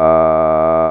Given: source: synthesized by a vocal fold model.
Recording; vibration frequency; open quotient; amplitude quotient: sustained vowel; 80 Hz; 0.2; 1.3